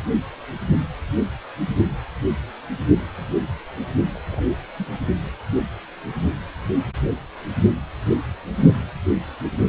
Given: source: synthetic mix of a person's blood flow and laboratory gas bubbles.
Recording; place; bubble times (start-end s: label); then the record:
Doppler ultrasound of blood flow; precordium
4.14-4.41 s: bubbles
4.78-4.85 s: bubbles
From the record:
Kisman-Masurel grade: 111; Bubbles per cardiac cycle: 1 to 2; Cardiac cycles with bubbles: 1 to 10%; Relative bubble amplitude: barely perceptible (0.100 to 0.250); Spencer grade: 1 (occasional bubble signal discernible with the cardiac motion signal, with majority of cardiac periods free of bubbles); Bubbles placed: only in the low amplitude regions of the cardiac cycle